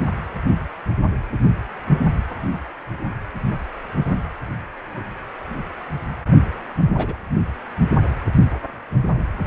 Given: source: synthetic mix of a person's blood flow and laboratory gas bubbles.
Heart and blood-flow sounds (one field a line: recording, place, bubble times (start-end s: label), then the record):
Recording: Doppler ultrasound of blood flow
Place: precordium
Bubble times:
6.97-7.16 s: bubbles
From the record:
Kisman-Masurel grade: 111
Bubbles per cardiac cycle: 1 to 2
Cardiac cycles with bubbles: 1 to 10%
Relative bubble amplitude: barely perceptible (0.100 to 0.250)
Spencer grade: 1 (occasional bubble signal discernible with the cardiac motion signal, with majority of cardiac periods free of bubbles)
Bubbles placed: anywhere in the cardiac cycle